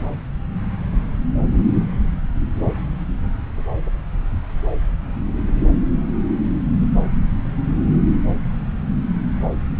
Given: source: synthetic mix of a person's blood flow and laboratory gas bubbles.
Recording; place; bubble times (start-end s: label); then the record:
Doppler ultrasound of blood flow; subclavian vein
no bubbles
From the record:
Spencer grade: 0 (complete lack of bubble signals)